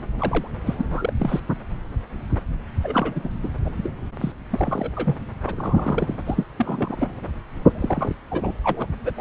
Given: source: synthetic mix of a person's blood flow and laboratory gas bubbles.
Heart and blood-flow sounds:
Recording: Doppler ultrasound of blood flow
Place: subclavian vein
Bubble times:
0.19-0.48 s: bubbles
0.66-0.75 s: bubbles
0.77-0.85 s: bubbles
0.90-1.13 s: bubbles
1.17-1.40 s: bubbles
2.83-3.30 s: bubbles
3.42-3.50 s: bubbles
3.65-3.70 s: bubbles
3.77-3.92 s: bubbles
4.21-4.32 s: bubbles
4.50-5.16 s: bubbles
5.46-6.15 s: bubbles
6.26-6.44 s: bubbles
6.57-7.12 s: bubbles
7.75-8.15 s: bubbles
8.30-8.55 s: bubbles
8.63-8.86 s: bubbles
9.05-9.11 s: bubbles
9.16-9.21 s: bubbles
From the record:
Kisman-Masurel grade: 232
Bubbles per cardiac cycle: several, 3 to 8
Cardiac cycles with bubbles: 50 to 99%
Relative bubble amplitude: moderate (0.250 to 0.450)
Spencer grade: 3 (all of the cardiac periods contain showers or single bubble signals, but not dominating or overriding the cardiac motion signals)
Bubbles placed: anywhere in the cardiac cycle

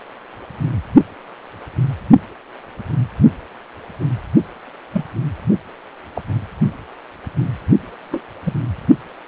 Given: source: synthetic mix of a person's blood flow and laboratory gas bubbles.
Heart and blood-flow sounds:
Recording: Doppler ultrasound of blood flow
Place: precordium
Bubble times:
4.93-5.04 s: bubbles
6.14-6.21 s: bubbles
8.11-8.23 s: bubbles
8.44-8.54 s: bubbles
From the record:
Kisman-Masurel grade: 122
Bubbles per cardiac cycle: 1 to 2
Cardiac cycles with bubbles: 10 to 50%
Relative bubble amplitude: moderate (0.250 to 0.450)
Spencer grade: 2 (many but less than half of the cardiac periods contain bubble signals, singularly or in groups)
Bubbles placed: only in the low amplitude regions of the cardiac cycle

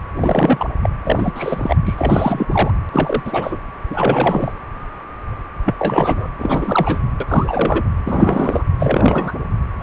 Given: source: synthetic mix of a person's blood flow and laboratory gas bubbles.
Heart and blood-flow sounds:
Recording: Doppler ultrasound of blood flow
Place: precordium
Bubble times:
0.17-0.66 s: bubbles
0.83-0.90 s: bubbles
1.04-1.76 s: bubbles
1.85-1.95 s: bubbles
1.98-2.46 s: bubbles
2.50-2.71 s: bubbles
2.91-3.58 s: bubbles
3.90-4.54 s: bubbles
5.65-5.75 s: bubbles
5.79-6.29 s: bubbles
6.38-7.00 s: bubbles
7.20-7.83 s: bubbles
8.04-8.63 s: bubbles
8.79-9.32 s: bubbles
9.79-9.83 s: bubbles
From the record:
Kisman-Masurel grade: 333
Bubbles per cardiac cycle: rolling drumbeat, 9 or more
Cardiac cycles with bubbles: 50 to 99%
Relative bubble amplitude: loud (0.450 to 0.775)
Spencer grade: 3 (all of the cardiac periods contain showers or single bubble signals, but not dominating or overriding the cardiac motion signals)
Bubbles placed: anywhere in the cardiac cycle

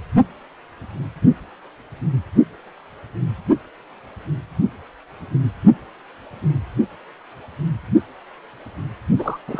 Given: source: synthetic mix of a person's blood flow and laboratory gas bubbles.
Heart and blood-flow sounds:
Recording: Doppler ultrasound of blood flow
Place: precordium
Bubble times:
9.18-9.38 s: bubbles
9.48-9.60 s: bubbles
From the record:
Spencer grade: 1 (occasional bubble signal discernible with the cardiac motion signal, with majority of cardiac periods free of bubbles)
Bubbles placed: only in the low amplitude regions of the cardiac cycle

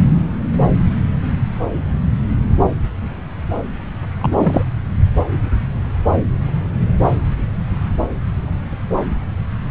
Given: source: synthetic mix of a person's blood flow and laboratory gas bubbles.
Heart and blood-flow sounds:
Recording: Doppler ultrasound of blood flow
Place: subclavian vein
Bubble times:
4.21-4.63 s: bubbles
From the record:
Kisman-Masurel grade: 213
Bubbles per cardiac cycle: several, 3 to 8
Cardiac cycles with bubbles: 1 to 10%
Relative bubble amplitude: loud (0.450 to 0.775)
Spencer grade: 1 (occasional bubble signal discernible with the cardiac motion signal, with majority of cardiac periods free of bubbles)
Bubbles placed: anywhere in the cardiac cycle

